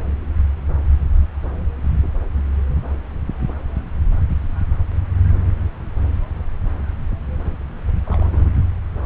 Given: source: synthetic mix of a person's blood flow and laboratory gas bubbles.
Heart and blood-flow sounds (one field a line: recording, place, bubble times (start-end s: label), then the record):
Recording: Doppler ultrasound of blood flow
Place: subclavian vein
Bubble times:
8.04-8.57 s: bubbles
From the record:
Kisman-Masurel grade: 211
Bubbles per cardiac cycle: several, 3 to 8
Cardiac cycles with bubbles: 1 to 10%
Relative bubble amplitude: barely perceptible (0.100 to 0.250)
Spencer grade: 1 (occasional bubble signal discernible with the cardiac motion signal, with majority of cardiac periods free of bubbles)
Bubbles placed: anywhere in the cardiac cycle